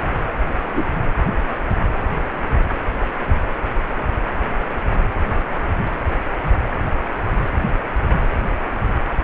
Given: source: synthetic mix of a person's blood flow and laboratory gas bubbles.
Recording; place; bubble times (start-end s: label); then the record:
Doppler ultrasound of blood flow; precordium
0.73-0.86 s: bubbles
From the record:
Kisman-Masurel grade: 112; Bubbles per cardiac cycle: 1 to 2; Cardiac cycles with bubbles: 1 to 10%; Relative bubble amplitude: moderate (0.250 to 0.450); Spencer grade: 1 (occasional bubble signal discernible with the cardiac motion signal, with majority of cardiac periods free of bubbles); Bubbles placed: anywhere in the cardiac cycle